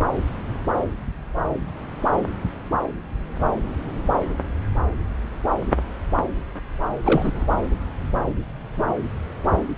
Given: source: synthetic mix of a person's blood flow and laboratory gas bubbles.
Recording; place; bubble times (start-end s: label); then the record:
Doppler ultrasound of blood flow; subclavian vein
7.04-7.46 s: bubbles
From the record:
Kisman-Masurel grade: 222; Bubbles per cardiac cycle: several, 3 to 8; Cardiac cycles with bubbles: 10 to 50%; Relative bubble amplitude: moderate (0.250 to 0.450); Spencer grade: 2 (many but less than half of the cardiac periods contain bubble signals, singularly or in groups); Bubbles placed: anywhere in the cardiac cycle